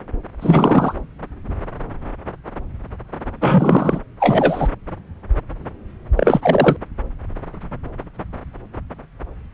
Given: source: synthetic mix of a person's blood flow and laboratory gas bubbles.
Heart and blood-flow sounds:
Doppler ultrasound of blood flow; subclavian vein
0.41-0.94 s: bubbles
3.41-3.99 s: bubbles
4.20-4.68 s: bubbles
6.17-6.77 s: bubbles
From the record:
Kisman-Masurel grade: 223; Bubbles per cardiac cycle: several, 3 to 8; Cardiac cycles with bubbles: 10 to 50%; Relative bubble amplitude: loud (0.450 to 0.775); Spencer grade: 2 (many but less than half of the cardiac periods contain bubble signals, singularly or in groups); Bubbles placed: anywhere in the cardiac cycle

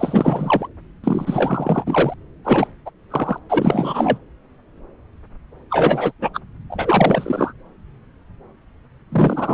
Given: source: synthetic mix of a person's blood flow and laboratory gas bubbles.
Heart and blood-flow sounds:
Doppler ultrasound of blood flow; subclavian vein
0.00-0.67 s: bubbles
1.03-2.14 s: bubbles
2.44-2.67 s: bubbles
2.85-2.90 s: bubbles
3.10-3.38 s: bubbles
3.49-4.18 s: bubbles
5.71-6.12 s: bubbles
6.21-6.30 s: bubbles
6.33-6.40 s: bubbles
6.69-7.53 s: bubbles
9.12-9.54 s: bubbles
From the record:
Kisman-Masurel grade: 333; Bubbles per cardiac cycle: rolling drumbeat, 9 or more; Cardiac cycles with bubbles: 50 to 99%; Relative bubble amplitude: loud (0.450 to 0.775); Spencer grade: 3 (all of the cardiac periods contain showers or single bubble signals, but not dominating or overriding the cardiac motion signals); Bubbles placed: anywhere in the cardiac cycle

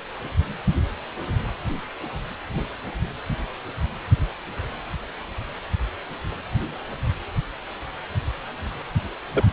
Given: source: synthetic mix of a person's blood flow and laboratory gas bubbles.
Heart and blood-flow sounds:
Doppler ultrasound of blood flow; precordium
9.33-9.44 s: bubbles
From the record:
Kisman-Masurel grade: 112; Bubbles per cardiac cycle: 1 to 2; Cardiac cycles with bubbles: 1 to 10%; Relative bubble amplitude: moderate (0.250 to 0.450); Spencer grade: 1 (occasional bubble signal discernible with the cardiac motion signal, with majority of cardiac periods free of bubbles); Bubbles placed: anywhere in the cardiac cycle

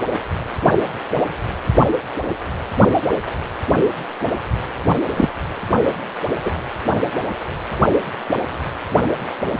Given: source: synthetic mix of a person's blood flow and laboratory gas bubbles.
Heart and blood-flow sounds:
Doppler ultrasound of blood flow; precordium
5.16-5.29 s: bubbles
6.43-6.52 s: bubbles
From the record:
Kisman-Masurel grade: 223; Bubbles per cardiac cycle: several, 3 to 8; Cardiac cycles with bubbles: 10 to 50%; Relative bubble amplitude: loud (0.450 to 0.775); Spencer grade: 2 (many but less than half of the cardiac periods contain bubble signals, singularly or in groups); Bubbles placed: anywhere in the cardiac cycle

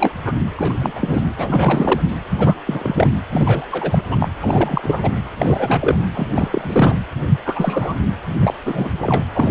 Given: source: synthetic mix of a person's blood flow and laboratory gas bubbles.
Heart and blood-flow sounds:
Doppler ultrasound of blood flow; precordium
0.00-0.14 s: bubbles
0.25-0.34 s: bubbles
0.56-0.92 s: bubbles
0.95-1.25 s: bubbles
1.38-2.01 s: bubbles
2.30-2.58 s: bubbles
2.67-3.08 s: bubbles
3.32-3.66 s: bubbles
3.70-4.04 s: bubbles
4.09-4.17 s: bubbles
4.20-4.29 s: bubbles
4.40-5.12 s: bubbles
5.38-5.99 s: bubbles
6.15-6.28 s: bubbles
6.35-6.96 s: bubbles
7.44-7.96 s: bubbles
8.40-8.54 s: bubbles
8.63-9.25 s: bubbles
9.34-9.51 s: bubbles
From the record:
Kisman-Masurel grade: 343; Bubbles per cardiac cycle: rolling drumbeat, 9 or more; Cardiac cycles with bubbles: 100%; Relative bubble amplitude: loud (0.450 to 0.775); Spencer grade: 3 (all of the cardiac periods contain showers or single bubble signals, but not dominating or overriding the cardiac motion signals); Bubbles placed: anywhere in the cardiac cycle

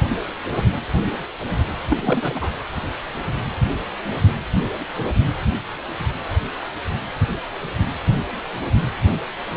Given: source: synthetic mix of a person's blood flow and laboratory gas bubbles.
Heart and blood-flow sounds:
Doppler ultrasound of blood flow; precordium
1.89-2.50 s: bubbles
From the record:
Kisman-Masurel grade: 222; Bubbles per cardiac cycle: several, 3 to 8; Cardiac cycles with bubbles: 10 to 50%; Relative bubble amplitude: moderate (0.250 to 0.450); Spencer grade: 2 (many but less than half of the cardiac periods contain bubble signals, singularly or in groups); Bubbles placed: anywhere in the cardiac cycle

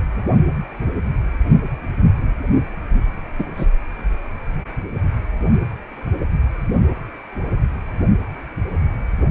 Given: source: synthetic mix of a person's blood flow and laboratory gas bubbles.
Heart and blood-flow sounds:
Doppler ultrasound of blood flow; precordium
3.39-3.44 s: bubbles
3.58-3.67 s: bubbles
From the record:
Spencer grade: 1 (occasional bubble signal discernible with the cardiac motion signal, with majority of cardiac periods free of bubbles); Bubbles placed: only in the low amplitude regions of the cardiac cycle

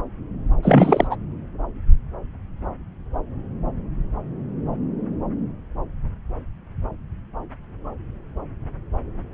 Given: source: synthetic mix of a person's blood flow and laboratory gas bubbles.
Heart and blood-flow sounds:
Doppler ultrasound of blood flow; subclavian vein
0.62-1.07 s: bubbles
1.10-1.16 s: bubbles
From the record:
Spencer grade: 1 (occasional bubble signal discernible with the cardiac motion signal, with majority of cardiac periods free of bubbles); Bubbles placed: anywhere in the cardiac cycle

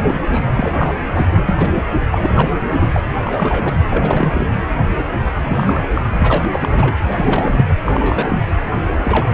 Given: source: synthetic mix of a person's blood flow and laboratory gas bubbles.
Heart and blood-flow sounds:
Doppler ultrasound of blood flow; precordium
0.00-0.21 s: bubbles
0.31-0.95 s: bubbles
1.13-1.82 s: bubbles
2.12-2.51 s: bubbles
2.68-2.88 s: bubbles
2.92-3.01 s: bubbles
3.13-3.18 s: bubbles
3.25-3.77 s: bubbles
3.90-4.50 s: bubbles
4.93-5.04 s: bubbles
5.25-5.90 s: bubbles
5.93-6.01 s: bubbles
6.18-6.96 s: bubbles
7.08-7.68 s: bubbles
7.85-8.43 s: bubbles
8.92-8.96 s: bubbles
9.04-9.34 s: bubbles
From the record:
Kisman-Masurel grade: 342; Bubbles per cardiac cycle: rolling drumbeat, 9 or more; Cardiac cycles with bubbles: 100%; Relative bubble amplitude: moderate (0.250 to 0.450); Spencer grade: 3 (all of the cardiac periods contain showers or single bubble signals, but not dominating or overriding the cardiac motion signals); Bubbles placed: anywhere in the cardiac cycle

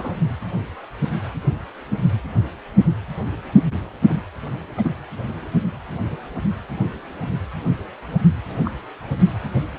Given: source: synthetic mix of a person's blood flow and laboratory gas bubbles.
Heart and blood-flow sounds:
Doppler ultrasound of blood flow; precordium
0.00-0.18 s: bubbles
4.01-4.22 s: bubbles
4.77-4.94 s: bubbles
8.64-8.71 s: bubbles
From the record:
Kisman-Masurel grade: 122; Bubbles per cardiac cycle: 1 to 2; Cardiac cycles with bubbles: 10 to 50%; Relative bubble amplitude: moderate (0.250 to 0.450); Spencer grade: 2 (many but less than half of the cardiac periods contain bubble signals, singularly or in groups); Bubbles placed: only in the low amplitude regions of the cardiac cycle

